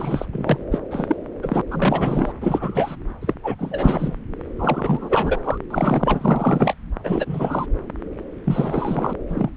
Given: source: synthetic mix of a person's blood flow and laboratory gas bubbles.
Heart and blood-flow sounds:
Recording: Doppler ultrasound of blood flow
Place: subclavian vein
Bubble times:
0.00-0.26 s: bubbles
0.32-0.58 s: bubbles
0.71-0.78 s: bubbles
0.90-1.17 s: bubbles
1.42-1.61 s: bubbles
1.70-2.33 s: bubbles
2.41-2.96 s: bubbles
3.21-3.34 s: bubbles
3.43-3.55 s: bubbles
3.59-4.17 s: bubbles
4.58-5.40 s: bubbles
5.44-5.58 s: bubbles
5.70-6.75 s: bubbles
7.04-7.67 s: bubbles
8.44-9.13 s: bubbles
9.28-9.50 s: bubbles
From the record:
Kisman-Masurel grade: 343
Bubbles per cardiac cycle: rolling drumbeat, 9 or more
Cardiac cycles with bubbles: 100%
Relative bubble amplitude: loud (0.450 to 0.775)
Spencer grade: 3 (all of the cardiac periods contain showers or single bubble signals, but not dominating or overriding the cardiac motion signals)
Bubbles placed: anywhere in the cardiac cycle

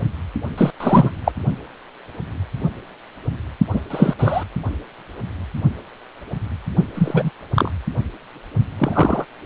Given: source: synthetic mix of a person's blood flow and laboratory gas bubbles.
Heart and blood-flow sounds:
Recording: Doppler ultrasound of blood flow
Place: precordium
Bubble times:
0.57-0.71 s: bubbles
0.80-1.10 s: bubbles
1.24-1.32 s: bubbles
3.73-3.80 s: bubbles
3.90-4.13 s: bubbles
4.19-4.43 s: bubbles
6.94-7.31 s: bubbles
7.56-7.70 s: bubbles
8.78-9.25 s: bubbles
From the record:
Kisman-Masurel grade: 223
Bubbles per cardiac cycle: several, 3 to 8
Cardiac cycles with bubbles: 10 to 50%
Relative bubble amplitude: loud (0.450 to 0.775)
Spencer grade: 2 (many but less than half of the cardiac periods contain bubble signals, singularly or in groups)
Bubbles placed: only in the low amplitude regions of the cardiac cycle

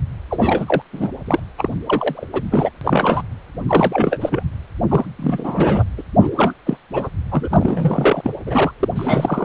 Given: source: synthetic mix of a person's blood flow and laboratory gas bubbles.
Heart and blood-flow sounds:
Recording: Doppler ultrasound of blood flow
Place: precordium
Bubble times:
0.30-0.82 s: bubbles
0.93-1.09 s: bubbles
1.26-1.40 s: bubbles
1.57-1.69 s: bubbles
1.84-2.28 s: bubbles
2.33-2.42 s: bubbles
2.51-2.70 s: bubbles
2.81-3.22 s: bubbles
3.67-4.43 s: bubbles
4.88-5.05 s: bubbles
5.19-5.83 s: bubbles
5.97-6.03 s: bubbles
6.21-6.30 s: bubbles
6.37-6.54 s: bubbles
6.66-6.77 s: bubbles
6.93-7.08 s: bubbles
7.31-8.32 s: bubbles
8.46-8.72 s: bubbles
8.81-8.88 s: bubbles
8.96-9.45 s: bubbles
From the record:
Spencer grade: 3 (all of the cardiac periods contain showers or single bubble signals, but not dominating or overriding the cardiac motion signals)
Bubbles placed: anywhere in the cardiac cycle

